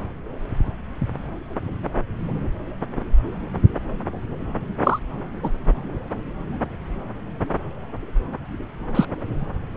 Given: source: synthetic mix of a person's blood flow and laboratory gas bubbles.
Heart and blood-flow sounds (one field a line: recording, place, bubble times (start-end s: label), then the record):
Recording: Doppler ultrasound of blood flow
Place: subclavian vein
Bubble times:
4.83-4.99 s: bubbles
5.43-5.50 s: bubbles
8.95-9.05 s: bubbles
From the record:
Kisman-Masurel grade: 123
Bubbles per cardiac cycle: 1 to 2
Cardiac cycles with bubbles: 10 to 50%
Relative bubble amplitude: loud (0.450 to 0.775)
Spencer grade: 2 (many but less than half of the cardiac periods contain bubble signals, singularly or in groups)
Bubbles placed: anywhere in the cardiac cycle